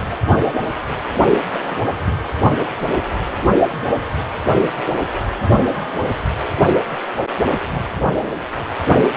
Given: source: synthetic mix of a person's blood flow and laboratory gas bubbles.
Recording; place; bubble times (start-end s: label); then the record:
Doppler ultrasound of blood flow; precordium
1.40-1.44 s: bubbles
1.52-1.82 s: bubbles
2.06-2.14 s: bubbles
From the record:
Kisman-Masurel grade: 211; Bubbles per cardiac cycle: several, 3 to 8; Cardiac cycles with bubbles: 1 to 10%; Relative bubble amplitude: barely perceptible (0.100 to 0.250); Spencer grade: 1 (occasional bubble signal discernible with the cardiac motion signal, with majority of cardiac periods free of bubbles); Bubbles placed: only in the low amplitude regions of the cardiac cycle